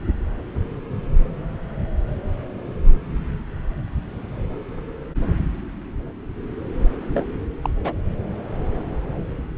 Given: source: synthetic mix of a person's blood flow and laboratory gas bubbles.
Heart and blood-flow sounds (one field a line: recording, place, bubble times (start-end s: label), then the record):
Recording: Doppler ultrasound of blood flow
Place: subclavian vein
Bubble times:
7.12-7.25 s: bubbles
7.62-7.70 s: bubbles
7.84-7.93 s: bubbles
From the record:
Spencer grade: 1 (occasional bubble signal discernible with the cardiac motion signal, with majority of cardiac periods free of bubbles)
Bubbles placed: anywhere in the cardiac cycle